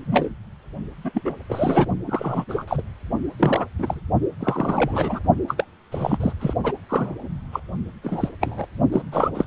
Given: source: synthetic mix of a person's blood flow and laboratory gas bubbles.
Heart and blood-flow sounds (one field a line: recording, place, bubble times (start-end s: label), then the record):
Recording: Doppler ultrasound of blood flow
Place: precordium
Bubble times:
0.00-0.34 s: bubbles
1.04-1.11 s: bubbles
1.14-1.22 s: bubbles
1.24-1.34 s: bubbles
1.49-1.86 s: bubbles
2.06-2.45 s: bubbles
2.49-2.64 s: bubbles
2.68-2.82 s: bubbles
3.39-3.65 s: bubbles
3.78-4.00 s: bubbles
4.39-5.20 s: bubbles
5.47-5.64 s: bubbles
5.92-6.17 s: bubbles
6.20-6.32 s: bubbles
6.40-6.54 s: bubbles
6.63-6.72 s: bubbles
6.88-7.14 s: bubbles
7.52-7.60 s: bubbles
8.03-8.29 s: bubbles
8.40-8.66 s: bubbles
8.92-9.02 s: bubbles
9.12-9.30 s: bubbles
9.34-9.46 s: bubbles
From the record:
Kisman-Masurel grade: 242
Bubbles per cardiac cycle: several, 3 to 8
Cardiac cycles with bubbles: 100%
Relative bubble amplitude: moderate (0.250 to 0.450)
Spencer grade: 3 (all of the cardiac periods contain showers or single bubble signals, but not dominating or overriding the cardiac motion signals)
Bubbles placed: only in the low amplitude regions of the cardiac cycle